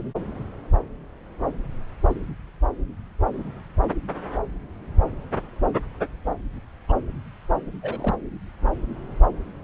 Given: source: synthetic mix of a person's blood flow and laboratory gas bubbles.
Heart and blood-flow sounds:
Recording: Doppler ultrasound of blood flow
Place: subclavian vein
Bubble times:
6.88-6.92 s: bubbles
7.82-8.14 s: bubbles
From the record:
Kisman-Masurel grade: 111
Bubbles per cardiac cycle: 1 to 2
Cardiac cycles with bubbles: 1 to 10%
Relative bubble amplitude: barely perceptible (0.100 to 0.250)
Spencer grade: 1 (occasional bubble signal discernible with the cardiac motion signal, with majority of cardiac periods free of bubbles)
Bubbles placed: anywhere in the cardiac cycle

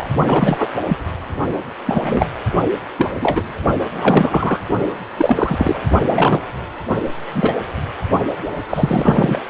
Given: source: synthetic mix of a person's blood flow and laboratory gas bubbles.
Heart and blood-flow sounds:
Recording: Doppler ultrasound of blood flow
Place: precordium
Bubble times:
0.00-0.07 s: bubbles
0.25-0.74 s: bubbles
0.88-0.97 s: bubbles
1.86-2.29 s: bubbles
2.97-3.08 s: bubbles
3.21-3.43 s: bubbles
3.94-4.60 s: bubbles
5.17-5.82 s: bubbles
6.06-6.39 s: bubbles
7.31-7.56 s: bubbles
8.70-9.41 s: bubbles
From the record:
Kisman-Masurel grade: 243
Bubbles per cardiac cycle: several, 3 to 8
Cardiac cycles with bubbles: 100%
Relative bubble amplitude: loud (0.450 to 0.775)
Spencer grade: 3 (all of the cardiac periods contain showers or single bubble signals, but not dominating or overriding the cardiac motion signals)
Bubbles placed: only in the low amplitude regions of the cardiac cycle

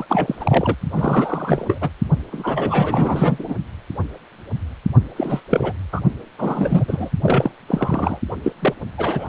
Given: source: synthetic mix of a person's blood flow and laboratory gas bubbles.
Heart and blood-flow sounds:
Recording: Doppler ultrasound of blood flow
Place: precordium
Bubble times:
0.00-0.06 s: bubbles
0.09-0.35 s: bubbles
0.40-0.76 s: bubbles
0.91-1.90 s: bubbles
2.32-3.55 s: bubbles
5.16-5.43 s: bubbles
5.49-5.73 s: bubbles
5.92-6.02 s: bubbles
6.38-6.85 s: bubbles
6.88-7.10 s: bubbles
7.23-7.52 s: bubbles
7.67-8.18 s: bubbles
8.43-8.52 s: bubbles
8.59-8.73 s: bubbles
8.97-9.29 s: bubbles
From the record:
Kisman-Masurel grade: 333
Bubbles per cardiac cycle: rolling drumbeat, 9 or more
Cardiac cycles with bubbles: 50 to 99%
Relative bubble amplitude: loud (0.450 to 0.775)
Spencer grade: 3 (all of the cardiac periods contain showers or single bubble signals, but not dominating or overriding the cardiac motion signals)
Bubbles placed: only in the low amplitude regions of the cardiac cycle

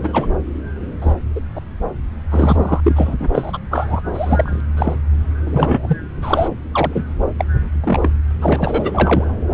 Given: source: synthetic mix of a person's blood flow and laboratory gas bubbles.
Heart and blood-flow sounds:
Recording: Doppler ultrasound of blood flow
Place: subclavian vein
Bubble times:
0.00-0.27 s: bubbles
1.00-1.14 s: bubbles
1.35-1.41 s: bubbles
1.55-1.60 s: bubbles
2.30-2.81 s: bubbles
2.84-3.15 s: bubbles
3.19-3.59 s: bubbles
3.71-4.02 s: bubbles
4.13-4.61 s: bubbles
4.77-4.97 s: bubbles
5.46-5.98 s: bubbles
6.21-6.49 s: bubbles
6.72-7.04 s: bubbles
7.38-7.45 s: bubbles
7.83-8.09 s: bubbles
8.40-9.34 s: bubbles
From the record:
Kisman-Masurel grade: 243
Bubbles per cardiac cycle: several, 3 to 8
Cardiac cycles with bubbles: 100%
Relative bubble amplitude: loud (0.450 to 0.775)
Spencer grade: 3 (all of the cardiac periods contain showers or single bubble signals, but not dominating or overriding the cardiac motion signals)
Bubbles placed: anywhere in the cardiac cycle

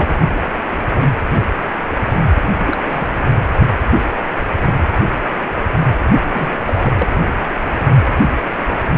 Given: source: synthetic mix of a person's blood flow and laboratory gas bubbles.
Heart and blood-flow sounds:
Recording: Doppler ultrasound of blood flow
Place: precordium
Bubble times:
0.00-0.09 s: bubbles
2.66-2.77 s: bubbles
2.84-3.08 s: bubbles
6.24-6.54 s: bubbles
6.66-6.92 s: bubbles
6.99-7.08 s: bubbles
From the record:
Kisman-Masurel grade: 222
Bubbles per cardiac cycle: several, 3 to 8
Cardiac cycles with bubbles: 10 to 50%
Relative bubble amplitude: moderate (0.250 to 0.450)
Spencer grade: 2 (many but less than half of the cardiac periods contain bubble signals, singularly or in groups)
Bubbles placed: anywhere in the cardiac cycle

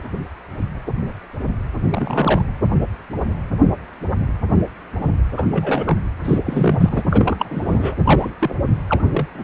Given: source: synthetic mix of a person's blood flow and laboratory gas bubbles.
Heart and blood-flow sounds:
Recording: Doppler ultrasound of blood flow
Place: precordium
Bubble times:
1.90-2.43 s: bubbles
5.37-5.48 s: bubbles
5.51-5.97 s: bubbles
6.25-6.38 s: bubbles
6.46-7.03 s: bubbles
7.10-7.36 s: bubbles
7.38-7.96 s: bubbles
8.04-8.30 s: bubbles
8.39-8.55 s: bubbles
8.89-9.03 s: bubbles
9.10-9.27 s: bubbles
9.34-9.44 s: bubbles
From the record:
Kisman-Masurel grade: 232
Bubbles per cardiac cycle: several, 3 to 8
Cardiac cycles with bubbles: 50 to 99%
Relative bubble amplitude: moderate (0.250 to 0.450)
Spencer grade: 3 (all of the cardiac periods contain showers or single bubble signals, but not dominating or overriding the cardiac motion signals)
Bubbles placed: anywhere in the cardiac cycle

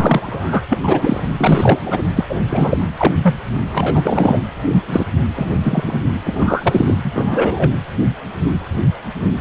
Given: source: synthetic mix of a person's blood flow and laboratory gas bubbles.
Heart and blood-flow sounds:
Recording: Doppler ultrasound of blood flow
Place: precordium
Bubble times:
0.00-0.62 s: bubbles
0.70-1.29 s: bubbles
1.37-1.78 s: bubbles
1.85-2.02 s: bubbles
2.15-2.35 s: bubbles
2.48-2.77 s: bubbles
2.97-3.13 s: bubbles
3.22-3.34 s: bubbles
3.72-4.42 s: bubbles
4.87-5.06 s: bubbles
5.35-5.47 s: bubbles
5.63-6.03 s: bubbles
6.24-6.95 s: bubbles
7.04-7.69 s: bubbles
From the record:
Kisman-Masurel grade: 233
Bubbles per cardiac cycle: several, 3 to 8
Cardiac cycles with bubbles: 50 to 99%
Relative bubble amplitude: loud (0.450 to 0.775)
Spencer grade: 3 (all of the cardiac periods contain showers or single bubble signals, but not dominating or overriding the cardiac motion signals)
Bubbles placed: anywhere in the cardiac cycle

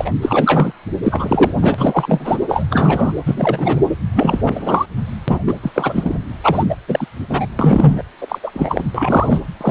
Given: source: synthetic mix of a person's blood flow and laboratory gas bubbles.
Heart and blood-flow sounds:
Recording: Doppler ultrasound of blood flow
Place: precordium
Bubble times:
0.00-0.12 s: bubbles
0.22-0.73 s: bubbles
1.03-1.52 s: bubbles
1.61-1.75 s: bubbles
1.78-2.39 s: bubbles
2.48-2.65 s: bubbles
2.70-3.12 s: bubbles
3.26-3.79 s: bubbles
4.14-4.86 s: bubbles
5.27-5.39 s: bubbles
5.46-5.59 s: bubbles
5.62-5.71 s: bubbles
5.75-6.18 s: bubbles
6.43-6.76 s: bubbles
6.88-7.06 s: bubbles
7.29-7.46 s: bubbles
7.59-8.03 s: bubbles
8.21-8.38 s: bubbles
8.43-8.84 s: bubbles
8.95-9.40 s: bubbles
9.61-9.71 s: bubbles
From the record:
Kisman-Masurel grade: 343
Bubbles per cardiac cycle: rolling drumbeat, 9 or more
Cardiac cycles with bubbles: 100%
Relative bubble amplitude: loud (0.450 to 0.775)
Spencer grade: 3 (all of the cardiac periods contain showers or single bubble signals, but not dominating or overriding the cardiac motion signals)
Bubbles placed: anywhere in the cardiac cycle

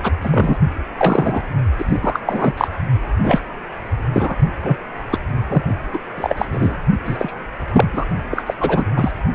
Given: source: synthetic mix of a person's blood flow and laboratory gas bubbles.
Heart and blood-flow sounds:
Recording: Doppler ultrasound of blood flow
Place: precordium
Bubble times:
0.03-0.12 s: bubbles
0.21-0.59 s: bubbles
0.99-1.42 s: bubbles
1.78-2.19 s: bubbles
2.25-2.54 s: bubbles
2.57-2.68 s: bubbles
3.23-3.39 s: bubbles
4.13-4.38 s: bubbles
4.62-4.77 s: bubbles
5.10-5.18 s: bubbles
5.48-5.62 s: bubbles
5.93-5.98 s: bubbles
6.17-6.45 s: bubbles
6.52-6.76 s: bubbles
7.05-7.34 s: bubbles
7.74-7.88 s: bubbles
7.92-8.07 s: bubbles
8.30-8.54 s: bubbles
8.60-8.85 s: bubbles
8.96-9.11 s: bubbles
From the record:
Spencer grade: 3 (all of the cardiac periods contain showers or single bubble signals, but not dominating or overriding the cardiac motion signals)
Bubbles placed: only in the low amplitude regions of the cardiac cycle

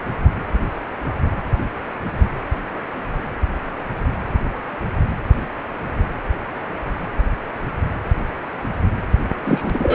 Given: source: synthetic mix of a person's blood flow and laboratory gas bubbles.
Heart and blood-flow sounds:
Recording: Doppler ultrasound of blood flow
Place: precordium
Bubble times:
9.45-9.94 s: bubbles
From the record:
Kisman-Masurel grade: 213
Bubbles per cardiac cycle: several, 3 to 8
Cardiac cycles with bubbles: 1 to 10%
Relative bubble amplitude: loud (0.450 to 0.775)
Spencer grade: 1 (occasional bubble signal discernible with the cardiac motion signal, with majority of cardiac periods free of bubbles)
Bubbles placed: anywhere in the cardiac cycle

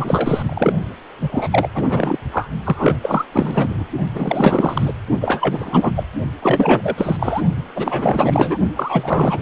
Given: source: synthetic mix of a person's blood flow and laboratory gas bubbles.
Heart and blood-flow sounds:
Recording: Doppler ultrasound of blood flow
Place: precordium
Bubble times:
0.00-0.43 s: bubbles
0.49-0.73 s: bubbles
1.21-1.69 s: bubbles
1.74-2.18 s: bubbles
2.32-2.48 s: bubbles
2.64-2.97 s: bubbles
3.02-3.25 s: bubbles
3.32-3.84 s: bubbles
4.14-4.93 s: bubbles
5.20-6.03 s: bubbles
6.42-7.42 s: bubbles
7.75-8.57 s: bubbles
8.75-9.42 s: bubbles
From the record:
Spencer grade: 4 (maximum detectable bubble signal sounding continuously throughout systole and diastole of every cardiac period, and overriding the amplitude of the normal cardiac signals)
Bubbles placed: only in the low amplitude regions of the cardiac cycle

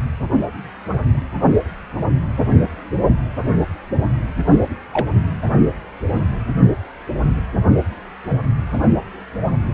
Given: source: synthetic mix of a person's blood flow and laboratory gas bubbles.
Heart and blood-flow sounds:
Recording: Doppler ultrasound of blood flow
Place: precordium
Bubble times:
4.51-4.59 s: bubbles
4.92-5.05 s: bubbles
From the record:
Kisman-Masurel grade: 112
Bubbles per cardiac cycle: 1 to 2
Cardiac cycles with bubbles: 1 to 10%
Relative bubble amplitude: moderate (0.250 to 0.450)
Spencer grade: 1 (occasional bubble signal discernible with the cardiac motion signal, with majority of cardiac periods free of bubbles)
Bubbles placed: anywhere in the cardiac cycle

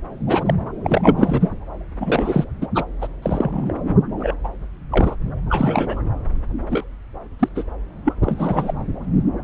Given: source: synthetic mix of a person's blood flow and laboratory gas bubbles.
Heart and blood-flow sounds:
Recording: Doppler ultrasound of blood flow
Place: subclavian vein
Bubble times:
0.27-0.54 s: bubbles
0.83-1.48 s: bubbles
2.00-2.45 s: bubbles
2.62-2.67 s: bubbles
2.75-2.83 s: bubbles
3.01-3.08 s: bubbles
3.22-3.73 s: bubbles
4.18-4.33 s: bubbles
4.43-4.48 s: bubbles
4.92-5.15 s: bubbles
5.49-6.02 s: bubbles
6.68-6.84 s: bubbles
7.39-7.49 s: bubbles
7.55-7.63 s: bubbles
8.05-8.13 s: bubbles
8.23-8.74 s: bubbles
From the record:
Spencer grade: 3 (all of the cardiac periods contain showers or single bubble signals, but not dominating or overriding the cardiac motion signals)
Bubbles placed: anywhere in the cardiac cycle

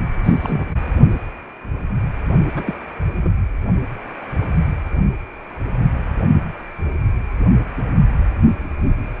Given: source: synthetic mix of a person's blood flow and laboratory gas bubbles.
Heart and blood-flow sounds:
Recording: Doppler ultrasound of blood flow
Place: precordium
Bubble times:
0.24-0.72 s: bubbles
0.81-0.91 s: bubbles
2.55-2.75 s: bubbles
3.15-3.31 s: bubbles
From the record:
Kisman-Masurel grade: 222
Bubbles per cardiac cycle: several, 3 to 8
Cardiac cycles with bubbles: 10 to 50%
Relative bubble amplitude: moderate (0.250 to 0.450)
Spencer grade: 2 (many but less than half of the cardiac periods contain bubble signals, singularly or in groups)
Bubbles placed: anywhere in the cardiac cycle

